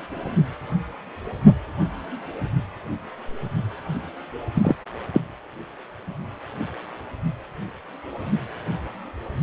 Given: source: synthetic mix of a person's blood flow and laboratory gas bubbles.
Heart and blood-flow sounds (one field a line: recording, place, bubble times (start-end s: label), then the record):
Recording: Doppler ultrasound of blood flow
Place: precordium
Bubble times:
4.54-4.75 s: bubbles
5.13-5.21 s: bubbles
From the record:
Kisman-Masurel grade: 113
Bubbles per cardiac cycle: 1 to 2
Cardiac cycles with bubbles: 1 to 10%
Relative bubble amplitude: loud (0.450 to 0.775)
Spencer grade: 1 (occasional bubble signal discernible with the cardiac motion signal, with majority of cardiac periods free of bubbles)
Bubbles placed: anywhere in the cardiac cycle